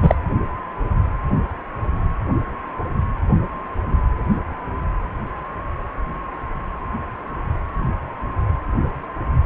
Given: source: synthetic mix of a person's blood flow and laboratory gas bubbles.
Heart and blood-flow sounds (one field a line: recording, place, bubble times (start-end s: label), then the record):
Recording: Doppler ultrasound of blood flow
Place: precordium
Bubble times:
0.02-0.15 s: bubbles
From the record:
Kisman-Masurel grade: 123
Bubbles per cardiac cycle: 1 to 2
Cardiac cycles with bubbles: 10 to 50%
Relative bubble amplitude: loud (0.450 to 0.775)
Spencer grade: 2 (many but less than half of the cardiac periods contain bubble signals, singularly or in groups)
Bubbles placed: only in the low amplitude regions of the cardiac cycle